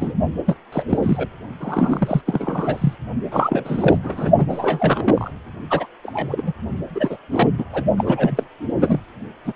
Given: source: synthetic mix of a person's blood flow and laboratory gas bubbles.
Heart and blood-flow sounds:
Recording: Doppler ultrasound of blood flow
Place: precordium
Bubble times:
0.00-0.14 s: bubbles
0.46-0.55 s: bubbles
0.72-0.98 s: bubbles
1.02-1.28 s: bubbles
1.60-2.21 s: bubbles
2.26-2.96 s: bubbles
3.31-3.99 s: bubbles
4.03-4.32 s: bubbles
4.38-4.46 s: bubbles
4.50-5.31 s: bubbles
5.70-5.86 s: bubbles
6.03-6.53 s: bubbles
6.94-7.17 s: bubbles
7.30-7.50 s: bubbles
7.58-7.64 s: bubbles
7.72-7.83 s: bubbles
7.98-8.47 s: bubbles
8.80-8.99 s: bubbles
9.45-9.53 s: bubbles
From the record:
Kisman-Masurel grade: 342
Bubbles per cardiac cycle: rolling drumbeat, 9 or more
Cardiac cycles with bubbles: 100%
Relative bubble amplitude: moderate (0.250 to 0.450)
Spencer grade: 3 (all of the cardiac periods contain showers or single bubble signals, but not dominating or overriding the cardiac motion signals)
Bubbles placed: only in the low amplitude regions of the cardiac cycle

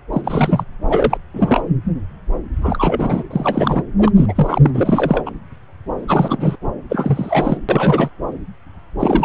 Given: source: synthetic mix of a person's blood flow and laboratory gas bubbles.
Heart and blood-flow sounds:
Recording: Doppler ultrasound of blood flow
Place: subclavian vein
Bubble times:
0.12-0.22 s: bubbles
0.24-0.65 s: bubbles
0.89-1.18 s: bubbles
1.33-1.61 s: bubbles
2.60-3.23 s: bubbles
3.30-3.82 s: bubbles
3.98-4.12 s: bubbles
4.16-4.70 s: bubbles
4.74-5.31 s: bubbles
6.08-6.56 s: bubbles
6.89-7.57 s: bubbles
7.68-8.10 s: bubbles
9.00-9.25 s: bubbles
From the record:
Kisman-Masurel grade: 333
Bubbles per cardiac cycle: rolling drumbeat, 9 or more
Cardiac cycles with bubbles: 50 to 99%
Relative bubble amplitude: loud (0.450 to 0.775)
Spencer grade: 3 (all of the cardiac periods contain showers or single bubble signals, but not dominating or overriding the cardiac motion signals)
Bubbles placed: anywhere in the cardiac cycle

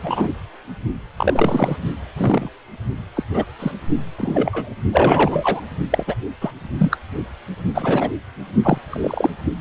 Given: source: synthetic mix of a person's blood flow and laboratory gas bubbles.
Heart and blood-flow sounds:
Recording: Doppler ultrasound of blood flow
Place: precordium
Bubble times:
0.00-0.29 s: bubbles
1.17-1.76 s: bubbles
2.17-2.49 s: bubbles
3.16-3.24 s: bubbles
3.33-3.45 s: bubbles
3.59-3.71 s: bubbles
4.17-4.75 s: bubbles
4.92-5.61 s: bubbles
5.90-6.04 s: bubbles
6.07-6.15 s: bubbles
6.41-6.51 s: bubbles
6.77-6.97 s: bubbles
7.75-8.12 s: bubbles
8.63-8.78 s: bubbles
8.89-9.30 s: bubbles
From the record:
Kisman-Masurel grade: 243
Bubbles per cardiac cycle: several, 3 to 8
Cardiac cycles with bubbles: 100%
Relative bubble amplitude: loud (0.450 to 0.775)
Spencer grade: 3 (all of the cardiac periods contain showers or single bubble signals, but not dominating or overriding the cardiac motion signals)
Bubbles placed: only in the low amplitude regions of the cardiac cycle

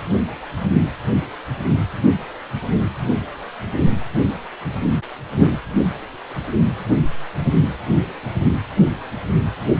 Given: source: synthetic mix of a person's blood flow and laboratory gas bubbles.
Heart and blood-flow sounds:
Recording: Doppler ultrasound of blood flow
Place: precordium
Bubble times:
no bubbles
From the record:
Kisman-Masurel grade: 000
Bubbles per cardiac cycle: 0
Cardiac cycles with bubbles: 0%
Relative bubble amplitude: no bubbles discernible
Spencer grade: 0 (complete lack of bubble signals)

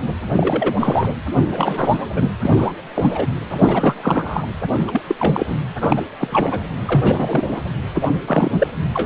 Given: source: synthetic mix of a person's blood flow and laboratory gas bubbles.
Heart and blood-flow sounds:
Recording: Doppler ultrasound of blood flow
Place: precordium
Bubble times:
0.35-0.74 s: bubbles
0.79-1.12 s: bubbles
1.35-1.97 s: bubbles
2.12-2.31 s: bubbles
2.42-2.73 s: bubbles
2.95-3.26 s: bubbles
3.50-4.47 s: bubbles
4.87-5.02 s: bubbles
5.07-5.15 s: bubbles
5.19-5.57 s: bubbles
5.81-6.04 s: bubbles
6.19-6.60 s: bubbles
6.85-7.59 s: bubbles
7.94-8.08 s: bubbles
8.15-8.67 s: bubbles
8.92-9.06 s: bubbles
From the record:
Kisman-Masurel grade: 343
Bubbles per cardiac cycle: rolling drumbeat, 9 or more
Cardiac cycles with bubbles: 100%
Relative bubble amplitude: loud (0.450 to 0.775)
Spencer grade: 3 (all of the cardiac periods contain showers or single bubble signals, but not dominating or overriding the cardiac motion signals)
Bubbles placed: anywhere in the cardiac cycle

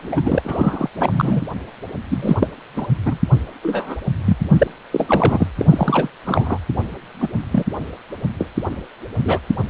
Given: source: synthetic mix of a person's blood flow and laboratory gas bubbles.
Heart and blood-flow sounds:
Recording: Doppler ultrasound of blood flow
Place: precordium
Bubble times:
0.00-0.40 s: bubbles
0.45-0.89 s: bubbles
0.97-1.43 s: bubbles
2.10-2.48 s: bubbles
2.76-2.86 s: bubbles
3.06-3.19 s: bubbles
3.63-3.95 s: bubbles
4.25-4.37 s: bubbles
4.50-4.67 s: bubbles
4.92-5.47 s: bubbles
5.56-6.09 s: bubbles
6.25-6.58 s: bubbles
7.20-7.29 s: bubbles
7.51-7.64 s: bubbles
8.38-8.49 s: bubbles
9.18-9.39 s: bubbles
From the record:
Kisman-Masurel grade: 243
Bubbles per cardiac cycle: several, 3 to 8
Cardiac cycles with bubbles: 100%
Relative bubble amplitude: loud (0.450 to 0.775)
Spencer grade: 3 (all of the cardiac periods contain showers or single bubble signals, but not dominating or overriding the cardiac motion signals)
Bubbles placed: anywhere in the cardiac cycle

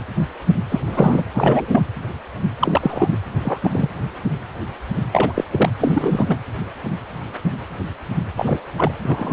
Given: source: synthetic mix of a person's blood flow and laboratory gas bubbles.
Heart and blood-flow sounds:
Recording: Doppler ultrasound of blood flow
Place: precordium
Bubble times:
0.70-0.81 s: bubbles
0.86-1.23 s: bubbles
1.35-1.81 s: bubbles
2.59-3.17 s: bubbles
3.42-3.59 s: bubbles
3.63-3.88 s: bubbles
5.12-5.44 s: bubbles
5.52-5.70 s: bubbles
5.80-6.26 s: bubbles
6.29-6.38 s: bubbles
8.36-8.60 s: bubbles
8.78-8.92 s: bubbles
9.03-9.32 s: bubbles
From the record:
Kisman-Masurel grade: 232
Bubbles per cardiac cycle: several, 3 to 8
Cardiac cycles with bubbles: 50 to 99%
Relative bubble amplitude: moderate (0.250 to 0.450)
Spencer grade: 3 (all of the cardiac periods contain showers or single bubble signals, but not dominating or overriding the cardiac motion signals)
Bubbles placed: anywhere in the cardiac cycle

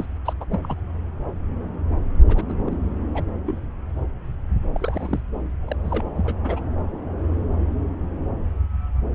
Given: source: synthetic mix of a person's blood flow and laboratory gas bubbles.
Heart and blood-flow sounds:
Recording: Doppler ultrasound of blood flow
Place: subclavian vein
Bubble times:
0.00-0.05 s: bubbles
0.25-0.33 s: bubbles
0.40-0.45 s: bubbles
0.51-0.59 s: bubbles
0.62-0.75 s: bubbles
2.28-2.44 s: bubbles
2.48-2.55 s: bubbles
2.66-2.75 s: bubbles
3.15-3.23 s: bubbles
3.46-3.57 s: bubbles
4.75-5.20 s: bubbles
5.67-5.76 s: bubbles
5.83-6.04 s: bubbles
6.14-6.35 s: bubbles
6.43-6.61 s: bubbles
From the record:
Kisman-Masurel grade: 221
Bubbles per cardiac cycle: several, 3 to 8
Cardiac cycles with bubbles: 10 to 50%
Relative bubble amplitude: barely perceptible (0.100 to 0.250)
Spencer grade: 2 (many but less than half of the cardiac periods contain bubble signals, singularly or in groups)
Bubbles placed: anywhere in the cardiac cycle

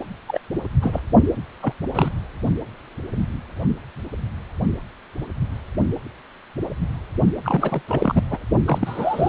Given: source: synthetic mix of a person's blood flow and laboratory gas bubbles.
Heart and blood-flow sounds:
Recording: Doppler ultrasound of blood flow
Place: precordium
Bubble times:
0.28-0.40 s: bubbles
0.82-1.00 s: bubbles
1.62-1.73 s: bubbles
1.94-2.09 s: bubbles
7.44-7.82 s: bubbles
7.88-8.23 s: bubbles
8.31-8.38 s: bubbles
8.67-9.29 s: bubbles
From the record:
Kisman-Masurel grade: 232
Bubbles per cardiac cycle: several, 3 to 8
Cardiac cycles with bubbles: 50 to 99%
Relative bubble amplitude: moderate (0.250 to 0.450)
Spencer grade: 3 (all of the cardiac periods contain showers or single bubble signals, but not dominating or overriding the cardiac motion signals)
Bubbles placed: only in the low amplitude regions of the cardiac cycle

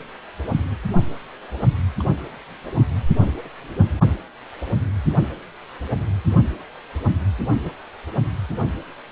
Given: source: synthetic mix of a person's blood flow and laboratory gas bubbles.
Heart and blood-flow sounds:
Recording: Doppler ultrasound of blood flow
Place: precordium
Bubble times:
2.00-2.04 s: bubbles
3.44-3.48 s: bubbles
7.65-7.70 s: bubbles
From the record:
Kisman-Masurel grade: 121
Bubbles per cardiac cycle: 1 to 2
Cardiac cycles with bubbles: 10 to 50%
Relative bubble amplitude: barely perceptible (0.100 to 0.250)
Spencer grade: 2 (many but less than half of the cardiac periods contain bubble signals, singularly or in groups)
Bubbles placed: only in the low amplitude regions of the cardiac cycle

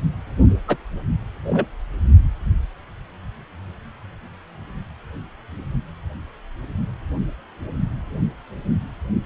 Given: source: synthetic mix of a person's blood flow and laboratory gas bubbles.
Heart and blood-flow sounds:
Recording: Doppler ultrasound of blood flow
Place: precordium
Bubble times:
0.68-0.76 s: bubbles
1.46-1.66 s: bubbles
From the record:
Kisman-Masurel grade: 113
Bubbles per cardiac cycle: 1 to 2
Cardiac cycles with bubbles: 1 to 10%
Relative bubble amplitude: loud (0.450 to 0.775)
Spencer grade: 1 (occasional bubble signal discernible with the cardiac motion signal, with majority of cardiac periods free of bubbles)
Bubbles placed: only in the low amplitude regions of the cardiac cycle

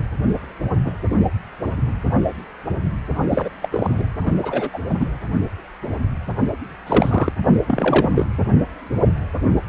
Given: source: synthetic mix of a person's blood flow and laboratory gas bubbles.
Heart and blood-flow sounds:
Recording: Doppler ultrasound of blood flow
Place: precordium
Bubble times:
0.00-0.07 s: bubbles
0.84-0.91 s: bubbles
1.10-1.16 s: bubbles
3.15-3.50 s: bubbles
3.62-3.69 s: bubbles
3.72-4.02 s: bubbles
4.19-4.32 s: bubbles
4.42-4.69 s: bubbles
4.72-4.79 s: bubbles
4.89-4.94 s: bubbles
5.00-5.07 s: bubbles
6.86-7.32 s: bubbles
7.67-8.25 s: bubbles
From the record:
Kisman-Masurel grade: 233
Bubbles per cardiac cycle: several, 3 to 8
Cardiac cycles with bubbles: 50 to 99%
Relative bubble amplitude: loud (0.450 to 0.775)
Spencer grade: 3 (all of the cardiac periods contain showers or single bubble signals, but not dominating or overriding the cardiac motion signals)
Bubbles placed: anywhere in the cardiac cycle

